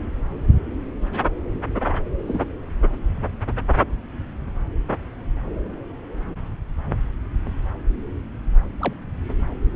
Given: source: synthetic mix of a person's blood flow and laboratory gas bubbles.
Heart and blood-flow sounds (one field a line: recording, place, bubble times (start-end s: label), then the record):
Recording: Doppler ultrasound of blood flow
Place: subclavian vein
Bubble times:
2.27-2.42 s: bubbles
8.79-8.93 s: bubbles
From the record:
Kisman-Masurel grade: 122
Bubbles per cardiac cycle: 1 to 2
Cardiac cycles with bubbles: 10 to 50%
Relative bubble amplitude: moderate (0.250 to 0.450)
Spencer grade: 2 (many but less than half of the cardiac periods contain bubble signals, singularly or in groups)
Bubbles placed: anywhere in the cardiac cycle